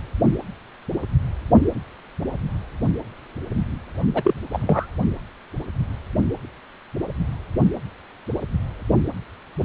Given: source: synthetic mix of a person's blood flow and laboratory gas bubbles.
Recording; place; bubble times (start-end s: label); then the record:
Doppler ultrasound of blood flow; precordium
4.14-4.34 s: bubbles
4.52-4.88 s: bubbles
From the record:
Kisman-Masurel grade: 222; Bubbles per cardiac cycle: several, 3 to 8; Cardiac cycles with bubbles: 10 to 50%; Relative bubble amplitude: moderate (0.250 to 0.450); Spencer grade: 2 (many but less than half of the cardiac periods contain bubble signals, singularly or in groups); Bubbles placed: only in the low amplitude regions of the cardiac cycle